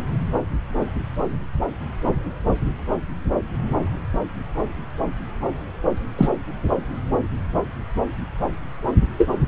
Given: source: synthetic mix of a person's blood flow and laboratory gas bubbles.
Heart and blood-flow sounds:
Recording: Doppler ultrasound of blood flow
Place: subclavian vein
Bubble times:
6.18-6.29 s: bubbles
9.18-9.29 s: bubbles
From the record:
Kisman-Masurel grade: 123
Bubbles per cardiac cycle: 1 to 2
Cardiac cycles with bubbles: 10 to 50%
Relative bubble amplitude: loud (0.450 to 0.775)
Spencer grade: 2 (many but less than half of the cardiac periods contain bubble signals, singularly or in groups)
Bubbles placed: anywhere in the cardiac cycle

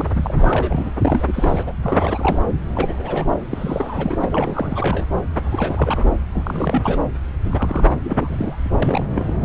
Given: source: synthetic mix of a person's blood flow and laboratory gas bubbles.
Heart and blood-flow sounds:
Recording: Doppler ultrasound of blood flow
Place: subclavian vein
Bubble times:
0.00-0.94 s: bubbles
1.01-1.72 s: bubbles
1.82-2.40 s: bubbles
2.73-3.46 s: bubbles
3.51-5.05 s: bubbles
5.42-6.14 s: bubbles
6.33-6.98 s: bubbles
7.45-7.87 s: bubbles
8.04-8.78 s: bubbles
8.82-9.06 s: bubbles
9.11-9.35 s: bubbles
9.41-9.45 s: bubbles
From the record:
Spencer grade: 3 (all of the cardiac periods contain showers or single bubble signals, but not dominating or overriding the cardiac motion signals)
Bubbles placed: anywhere in the cardiac cycle

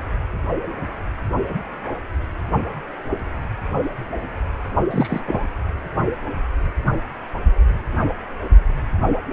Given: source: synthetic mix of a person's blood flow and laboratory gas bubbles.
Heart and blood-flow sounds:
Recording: Doppler ultrasound of blood flow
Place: precordium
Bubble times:
4.90-5.21 s: bubbles
5.25-5.46 s: bubbles
From the record:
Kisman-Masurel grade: 213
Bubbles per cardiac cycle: several, 3 to 8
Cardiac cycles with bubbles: 1 to 10%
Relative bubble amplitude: loud (0.450 to 0.775)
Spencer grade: 1 (occasional bubble signal discernible with the cardiac motion signal, with majority of cardiac periods free of bubbles)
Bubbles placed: anywhere in the cardiac cycle

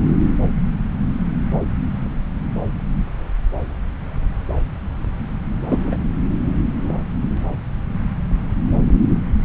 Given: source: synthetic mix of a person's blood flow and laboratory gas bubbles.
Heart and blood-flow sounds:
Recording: Doppler ultrasound of blood flow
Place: subclavian vein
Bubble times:
5.70-5.97 s: bubbles
From the record:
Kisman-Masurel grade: 113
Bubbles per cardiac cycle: 1 to 2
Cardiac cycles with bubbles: 1 to 10%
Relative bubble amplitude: loud (0.450 to 0.775)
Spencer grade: 1 (occasional bubble signal discernible with the cardiac motion signal, with majority of cardiac periods free of bubbles)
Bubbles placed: anywhere in the cardiac cycle

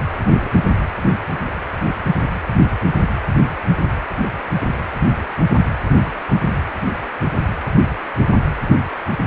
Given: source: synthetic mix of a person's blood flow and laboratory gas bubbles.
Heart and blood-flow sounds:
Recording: Doppler ultrasound of blood flow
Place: precordium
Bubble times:
0.26-0.51 s: bubbles
From the record:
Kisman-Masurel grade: 111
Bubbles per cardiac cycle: 1 to 2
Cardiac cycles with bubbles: 1 to 10%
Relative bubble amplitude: barely perceptible (0.100 to 0.250)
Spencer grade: 1 (occasional bubble signal discernible with the cardiac motion signal, with majority of cardiac periods free of bubbles)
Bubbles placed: anywhere in the cardiac cycle

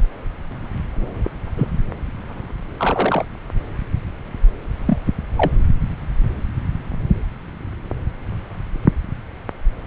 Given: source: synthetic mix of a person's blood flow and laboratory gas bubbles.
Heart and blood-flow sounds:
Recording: Doppler ultrasound of blood flow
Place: subclavian vein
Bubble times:
1.56-1.68 s: bubbles
2.77-3.25 s: bubbles
4.87-4.98 s: bubbles
5.37-5.51 s: bubbles
From the record:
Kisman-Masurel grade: 122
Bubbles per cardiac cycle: 1 to 2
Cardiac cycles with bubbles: 10 to 50%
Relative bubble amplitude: moderate (0.250 to 0.450)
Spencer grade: 2 (many but less than half of the cardiac periods contain bubble signals, singularly or in groups)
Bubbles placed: anywhere in the cardiac cycle

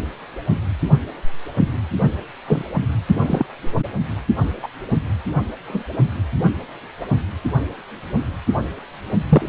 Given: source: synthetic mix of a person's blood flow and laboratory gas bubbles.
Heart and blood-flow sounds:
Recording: Doppler ultrasound of blood flow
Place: precordium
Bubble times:
2.47-2.62 s: bubbles
3.08-3.46 s: bubbles
4.62-4.68 s: bubbles
5.67-5.83 s: bubbles
9.29-9.49 s: bubbles
From the record:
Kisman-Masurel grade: 122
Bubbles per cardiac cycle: 1 to 2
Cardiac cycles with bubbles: 10 to 50%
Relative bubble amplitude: moderate (0.250 to 0.450)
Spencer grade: 2 (many but less than half of the cardiac periods contain bubble signals, singularly or in groups)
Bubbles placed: anywhere in the cardiac cycle

